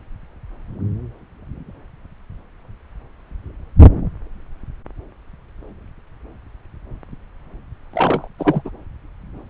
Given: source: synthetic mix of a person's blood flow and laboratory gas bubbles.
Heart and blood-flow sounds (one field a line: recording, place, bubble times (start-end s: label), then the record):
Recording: Doppler ultrasound of blood flow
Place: subclavian vein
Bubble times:
7.93-8.28 s: bubbles
8.39-8.71 s: bubbles
From the record:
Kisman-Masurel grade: 212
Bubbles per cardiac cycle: several, 3 to 8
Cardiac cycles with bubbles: 1 to 10%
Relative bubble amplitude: moderate (0.250 to 0.450)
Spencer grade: 1 (occasional bubble signal discernible with the cardiac motion signal, with majority of cardiac periods free of bubbles)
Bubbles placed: anywhere in the cardiac cycle